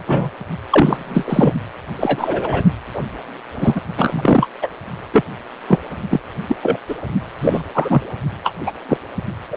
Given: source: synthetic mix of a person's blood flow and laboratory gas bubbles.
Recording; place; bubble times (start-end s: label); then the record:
Doppler ultrasound of blood flow; precordium
0.00-0.04 s: bubbles
0.07-0.30 s: bubbles
0.70-1.52 s: bubbles
1.97-2.64 s: bubbles
2.94-3.04 s: bubbles
3.56-3.81 s: bubbles
3.98-4.48 s: bubbles
4.61-4.67 s: bubbles
5.12-5.23 s: bubbles
5.68-5.81 s: bubbles
6.10-6.20 s: bubbles
6.48-6.56 s: bubbles
6.61-6.77 s: bubbles
6.88-6.95 s: bubbles
7.40-7.63 s: bubbles
7.74-8.03 s: bubbles
8.43-8.53 s: bubbles
8.65-8.72 s: bubbles
8.88-8.97 s: bubbles
9.50-9.57 s: bubbles
From the record:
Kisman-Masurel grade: 243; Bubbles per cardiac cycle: several, 3 to 8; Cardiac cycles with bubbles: 100%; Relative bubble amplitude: loud (0.450 to 0.775); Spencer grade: 3 (all of the cardiac periods contain showers or single bubble signals, but not dominating or overriding the cardiac motion signals); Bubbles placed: only in the low amplitude regions of the cardiac cycle